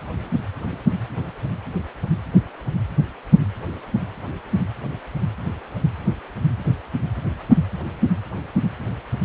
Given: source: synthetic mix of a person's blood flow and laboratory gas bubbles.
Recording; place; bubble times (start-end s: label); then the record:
Doppler ultrasound of blood flow; precordium
no bubbles
From the record:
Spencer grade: 0 (complete lack of bubble signals)